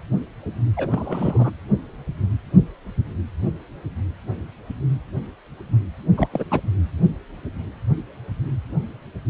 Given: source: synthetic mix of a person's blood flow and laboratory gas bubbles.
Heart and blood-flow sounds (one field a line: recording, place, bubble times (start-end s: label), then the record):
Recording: Doppler ultrasound of blood flow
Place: precordium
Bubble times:
0.77-1.50 s: bubbles
6.17-6.28 s: bubbles
6.32-6.44 s: bubbles
6.50-6.61 s: bubbles
From the record:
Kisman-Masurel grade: 222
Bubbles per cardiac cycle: several, 3 to 8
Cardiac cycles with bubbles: 10 to 50%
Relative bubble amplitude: moderate (0.250 to 0.450)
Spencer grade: 2 (many but less than half of the cardiac periods contain bubble signals, singularly or in groups)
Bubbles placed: anywhere in the cardiac cycle